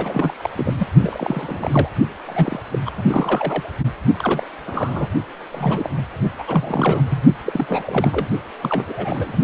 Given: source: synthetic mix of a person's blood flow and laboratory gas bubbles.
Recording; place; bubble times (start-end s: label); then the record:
Doppler ultrasound of blood flow; precordium
0.00-0.50 s: bubbles
0.57-0.73 s: bubbles
0.78-0.86 s: bubbles
1.01-1.89 s: bubbles
2.25-2.59 s: bubbles
2.72-2.78 s: bubbles
2.85-2.91 s: bubbles
2.97-3.02 s: bubbles
3.06-3.62 s: bubbles
4.19-4.47 s: bubbles
4.67-5.08 s: bubbles
5.52-5.90 s: bubbles
5.97-6.02 s: bubbles
6.38-7.01 s: bubbles
7.10-7.24 s: bubbles
7.43-8.28 s: bubbles
8.62-9.36 s: bubbles
From the record:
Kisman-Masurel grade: 342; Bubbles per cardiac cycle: rolling drumbeat, 9 or more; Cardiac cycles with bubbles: 100%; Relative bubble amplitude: moderate (0.250 to 0.450); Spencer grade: 3 (all of the cardiac periods contain showers or single bubble signals, but not dominating or overriding the cardiac motion signals); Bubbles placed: only in the low amplitude regions of the cardiac cycle